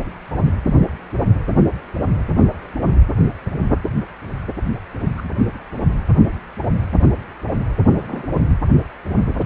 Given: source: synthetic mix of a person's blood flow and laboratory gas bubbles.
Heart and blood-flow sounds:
Doppler ultrasound of blood flow; precordium
5.17-5.29 s: bubbles
7.91-8.28 s: bubbles
From the record:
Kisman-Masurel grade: 122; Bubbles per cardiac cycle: 1 to 2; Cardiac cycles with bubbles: 10 to 50%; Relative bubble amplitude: moderate (0.250 to 0.450); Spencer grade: 2 (many but less than half of the cardiac periods contain bubble signals, singularly or in groups); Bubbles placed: anywhere in the cardiac cycle

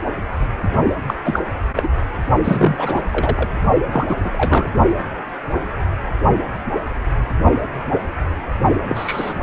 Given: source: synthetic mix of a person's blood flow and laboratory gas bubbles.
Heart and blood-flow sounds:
Doppler ultrasound of blood flow; precordium
1.07-1.14 s: bubbles
1.25-1.40 s: bubbles
1.77-1.88 s: bubbles
2.44-3.02 s: bubbles
3.12-3.49 s: bubbles
3.92-4.17 s: bubbles
4.24-4.69 s: bubbles
8.89-9.39 s: bubbles
From the record:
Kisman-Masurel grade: 232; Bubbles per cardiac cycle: several, 3 to 8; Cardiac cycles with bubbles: 50 to 99%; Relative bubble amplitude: moderate (0.250 to 0.450); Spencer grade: 3 (all of the cardiac periods contain showers or single bubble signals, but not dominating or overriding the cardiac motion signals); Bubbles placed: only in the low amplitude regions of the cardiac cycle

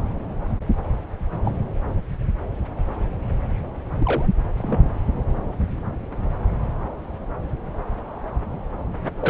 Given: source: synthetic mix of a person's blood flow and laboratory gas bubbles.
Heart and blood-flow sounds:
Doppler ultrasound of blood flow; subclavian vein
1.44-1.52 s: bubbles
3.99-4.33 s: bubbles
4.58-4.92 s: bubbles
9.21-9.29 s: bubbles
From the record:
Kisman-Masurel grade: 122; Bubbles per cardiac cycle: 1 to 2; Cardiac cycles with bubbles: 10 to 50%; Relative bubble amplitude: moderate (0.250 to 0.450); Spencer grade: 2 (many but less than half of the cardiac periods contain bubble signals, singularly or in groups); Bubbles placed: anywhere in the cardiac cycle

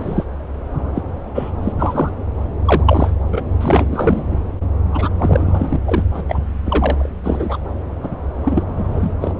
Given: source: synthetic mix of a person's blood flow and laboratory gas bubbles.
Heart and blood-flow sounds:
Doppler ultrasound of blood flow; subclavian vein
0.00-0.24 s: bubbles
0.95-1.02 s: bubbles
1.34-1.51 s: bubbles
1.63-1.72 s: bubbles
1.78-2.10 s: bubbles
2.65-3.12 s: bubbles
3.31-3.44 s: bubbles
3.60-4.38 s: bubbles
4.92-5.08 s: bubbles
5.17-5.79 s: bubbles
5.86-6.04 s: bubbles
6.14-6.22 s: bubbles
6.29-6.41 s: bubbles
6.66-7.10 s: bubbles
7.23-7.58 s: bubbles
8.03-8.17 s: bubbles
8.44-8.63 s: bubbles
8.77-9.12 s: bubbles
9.21-9.33 s: bubbles
From the record:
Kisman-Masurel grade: 233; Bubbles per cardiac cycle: several, 3 to 8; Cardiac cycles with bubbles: 50 to 99%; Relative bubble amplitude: loud (0.450 to 0.775); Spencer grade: 3 (all of the cardiac periods contain showers or single bubble signals, but not dominating or overriding the cardiac motion signals); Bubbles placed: anywhere in the cardiac cycle

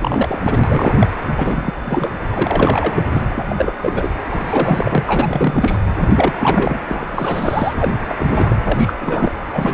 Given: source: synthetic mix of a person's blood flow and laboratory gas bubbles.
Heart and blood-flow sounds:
Doppler ultrasound of blood flow; precordium
0.00-0.39 s: bubbles
0.43-1.07 s: bubbles
1.37-1.71 s: bubbles
1.80-2.10 s: bubbles
2.33-3.06 s: bubbles
3.12-3.25 s: bubbles
3.29-3.45 s: bubbles
3.49-3.73 s: bubbles
3.81-4.09 s: bubbles
4.32-4.40 s: bubbles
4.45-5.78 s: bubbles
6.00-6.09 s: bubbles
6.15-6.33 s: bubbles
6.39-6.79 s: bubbles
6.88-7.73 s: bubbles
7.76-7.93 s: bubbles
8.09-8.15 s: bubbles
8.18-8.55 s: bubbles
8.64-8.95 s: bubbles
9.00-9.31 s: bubbles
9.53-9.74 s: bubbles
From the record:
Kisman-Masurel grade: 342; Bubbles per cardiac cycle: rolling drumbeat, 9 or more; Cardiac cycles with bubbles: 100%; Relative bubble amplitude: moderate (0.250 to 0.450); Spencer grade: 3 (all of the cardiac periods contain showers or single bubble signals, but not dominating or overriding the cardiac motion signals); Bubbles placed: anywhere in the cardiac cycle

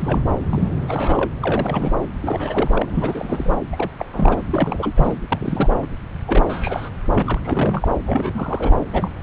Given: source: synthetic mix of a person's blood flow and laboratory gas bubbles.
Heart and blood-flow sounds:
Doppler ultrasound of blood flow; subclavian vein
0.00-0.25 s: bubbles
0.49-0.69 s: bubbles
0.87-1.30 s: bubbles
1.42-1.92 s: bubbles
2.23-3.54 s: bubbles
3.73-3.91 s: bubbles
3.98-4.05 s: bubbles
4.13-4.42 s: bubbles
4.50-4.93 s: bubbles
4.96-5.15 s: bubbles
5.29-5.78 s: bubbles
5.82-5.87 s: bubbles
6.28-6.44 s: bubbles
6.49-6.90 s: bubbles
7.10-7.40 s: bubbles
7.44-7.88 s: bubbles
8.06-8.74 s: bubbles
8.93-9.09 s: bubbles
From the record:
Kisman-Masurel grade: 342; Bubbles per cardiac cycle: rolling drumbeat, 9 or more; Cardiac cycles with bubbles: 100%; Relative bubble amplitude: moderate (0.250 to 0.450); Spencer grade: 3 (all of the cardiac periods contain showers or single bubble signals, but not dominating or overriding the cardiac motion signals); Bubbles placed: anywhere in the cardiac cycle

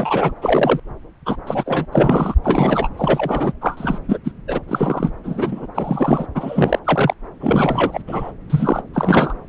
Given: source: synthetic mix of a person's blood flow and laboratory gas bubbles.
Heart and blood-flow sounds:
Doppler ultrasound of blood flow; subclavian vein
0.00-0.31 s: bubbles
0.42-0.80 s: bubbles
1.25-1.36 s: bubbles
1.47-1.85 s: bubbles
1.92-2.35 s: bubbles
2.44-2.88 s: bubbles
2.97-3.52 s: bubbles
3.61-3.99 s: bubbles
4.08-4.18 s: bubbles
4.24-4.32 s: bubbles
4.47-4.61 s: bubbles
4.67-5.10 s: bubbles
5.24-5.67 s: bubbles
5.75-6.26 s: bubbles
6.34-6.79 s: bubbles
6.84-7.14 s: bubbles
7.41-8.01 s: bubbles
8.07-8.32 s: bubbles
8.49-8.82 s: bubbles
8.94-9.34 s: bubbles
From the record:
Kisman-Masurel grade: 243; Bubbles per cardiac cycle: several, 3 to 8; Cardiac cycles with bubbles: 100%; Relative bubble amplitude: loud (0.450 to 0.775); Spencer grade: 3 (all of the cardiac periods contain showers or single bubble signals, but not dominating or overriding the cardiac motion signals); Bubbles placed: anywhere in the cardiac cycle

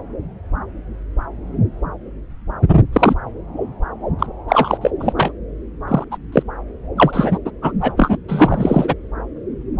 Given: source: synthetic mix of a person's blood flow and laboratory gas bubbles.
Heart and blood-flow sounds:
Doppler ultrasound of blood flow; subclavian vein
2.93-3.15 s: bubbles
4.19-4.27 s: bubbles
4.48-4.78 s: bubbles
4.81-4.91 s: bubbles
5.00-5.12 s: bubbles
5.17-5.32 s: bubbles
5.88-6.04 s: bubbles
6.11-6.17 s: bubbles
6.32-6.43 s: bubbles
6.97-7.39 s: bubbles
7.45-7.51 s: bubbles
7.62-7.73 s: bubbles
7.81-7.92 s: bubbles
7.97-8.17 s: bubbles
8.28-8.94 s: bubbles
From the record:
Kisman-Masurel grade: 233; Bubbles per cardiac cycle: several, 3 to 8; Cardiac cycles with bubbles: 50 to 99%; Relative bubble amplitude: loud (0.450 to 0.775); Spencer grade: 3 (all of the cardiac periods contain showers or single bubble signals, but not dominating or overriding the cardiac motion signals); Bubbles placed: anywhere in the cardiac cycle

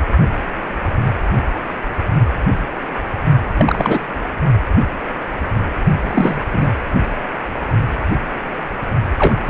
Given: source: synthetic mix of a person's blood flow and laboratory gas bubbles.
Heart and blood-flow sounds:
Doppler ultrasound of blood flow; precordium
3.57-4.07 s: bubbles
6.01-6.39 s: bubbles
6.52-6.71 s: bubbles
9.18-9.37 s: bubbles
9.46-9.50 s: bubbles
From the record:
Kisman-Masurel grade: 233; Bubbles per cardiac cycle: several, 3 to 8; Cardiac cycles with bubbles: 50 to 99%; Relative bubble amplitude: loud (0.450 to 0.775); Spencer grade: 3 (all of the cardiac periods contain showers or single bubble signals, but not dominating or overriding the cardiac motion signals); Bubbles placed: only in the low amplitude regions of the cardiac cycle

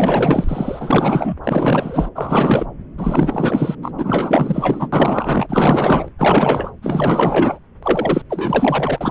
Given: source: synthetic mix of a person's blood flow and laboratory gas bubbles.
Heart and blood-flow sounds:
Doppler ultrasound of blood flow; subclavian vein
0.00-1.34 s: bubbles
1.44-2.10 s: bubbles
2.15-2.66 s: bubbles
2.97-3.75 s: bubbles
3.82-3.91 s: bubbles
3.98-4.88 s: bubbles
4.92-6.09 s: bubbles
6.18-6.71 s: bubbles
6.82-7.58 s: bubbles
7.82-8.22 s: bubbles
8.29-9.11 s: bubbles
From the record:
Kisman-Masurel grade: 444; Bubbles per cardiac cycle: continuous sound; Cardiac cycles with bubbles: 100%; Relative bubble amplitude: maximal (0.775 to 0.999); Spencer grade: 4 (maximum detectable bubble signal sounding continuously throughout systole and diastole of every cardiac period, and overriding the amplitude of the normal cardiac signals); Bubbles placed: anywhere in the cardiac cycle

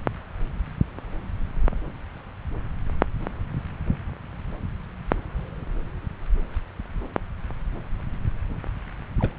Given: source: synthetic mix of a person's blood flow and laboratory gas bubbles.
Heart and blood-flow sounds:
Doppler ultrasound of blood flow; subclavian vein
9.19-9.33 s: bubbles
From the record:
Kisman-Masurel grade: 121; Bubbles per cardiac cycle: 1 to 2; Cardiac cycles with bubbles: 10 to 50%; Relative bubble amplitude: barely perceptible (0.100 to 0.250); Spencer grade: 2 (many but less than half of the cardiac periods contain bubble signals, singularly or in groups); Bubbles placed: anywhere in the cardiac cycle

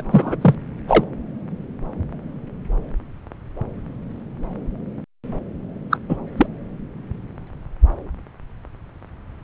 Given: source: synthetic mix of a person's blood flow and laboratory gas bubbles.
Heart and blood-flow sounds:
Doppler ultrasound of blood flow; subclavian vein
0.10-0.35 s: bubbles
0.41-0.55 s: bubbles
0.88-1.04 s: bubbles
5.90-5.97 s: bubbles
6.09-6.17 s: bubbles
6.37-6.46 s: bubbles
From the record:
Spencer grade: 2 (many but less than half of the cardiac periods contain bubble signals, singularly or in groups); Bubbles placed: anywhere in the cardiac cycle

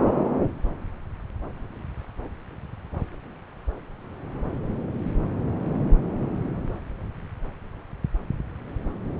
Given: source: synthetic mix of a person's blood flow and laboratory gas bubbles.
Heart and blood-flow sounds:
Doppler ultrasound of blood flow; subclavian vein
no bubbles
From the record:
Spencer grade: 0 (complete lack of bubble signals)

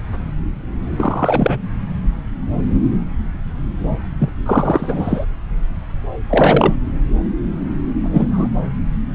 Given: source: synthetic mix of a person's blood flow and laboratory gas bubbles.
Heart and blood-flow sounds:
Doppler ultrasound of blood flow; subclavian vein
0.96-1.61 s: bubbles
4.19-4.29 s: bubbles
4.46-5.26 s: bubbles
6.29-6.77 s: bubbles
8.04-8.48 s: bubbles
From the record:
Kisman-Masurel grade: 223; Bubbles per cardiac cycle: several, 3 to 8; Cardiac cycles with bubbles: 10 to 50%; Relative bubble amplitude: loud (0.450 to 0.775); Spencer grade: 2 (many but less than half of the cardiac periods contain bubble signals, singularly or in groups); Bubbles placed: anywhere in the cardiac cycle

